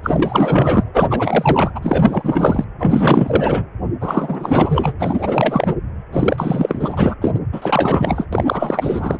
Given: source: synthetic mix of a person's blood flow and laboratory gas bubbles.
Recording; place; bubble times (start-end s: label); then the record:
Doppler ultrasound of blood flow; precordium
0.03-1.71 s: bubbles
1.74-2.65 s: bubbles
2.78-3.66 s: bubbles
4.00-4.93 s: bubbles
4.99-5.74 s: bubbles
6.12-7.14 s: bubbles
7.21-7.31 s: bubbles
7.34-7.40 s: bubbles
7.52-8.27 s: bubbles
8.33-9.18 s: bubbles
From the record:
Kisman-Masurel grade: 444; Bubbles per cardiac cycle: continuous sound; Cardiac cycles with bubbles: 100%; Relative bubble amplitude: maximal (0.775 to 0.999); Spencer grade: 4 (maximum detectable bubble signal sounding continuously throughout systole and diastole of every cardiac period, and overriding the amplitude of the normal cardiac signals); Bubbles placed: anywhere in the cardiac cycle